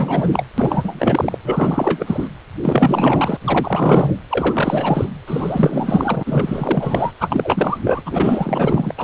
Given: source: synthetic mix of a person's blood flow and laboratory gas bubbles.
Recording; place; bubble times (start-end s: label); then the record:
Doppler ultrasound of blood flow; precordium
0.00-0.44 s: bubbles
0.57-1.38 s: bubbles
1.44-2.27 s: bubbles
2.62-3.37 s: bubbles
3.41-4.16 s: bubbles
4.30-5.11 s: bubbles
5.27-7.12 s: bubbles
7.20-7.78 s: bubbles
7.83-8.02 s: bubbles
8.05-8.93 s: bubbles
8.97-9.04 s: bubbles
From the record:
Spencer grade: 4 (maximum detectable bubble signal sounding continuously throughout systole and diastole of every cardiac period, and overriding the amplitude of the normal cardiac signals); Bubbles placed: anywhere in the cardiac cycle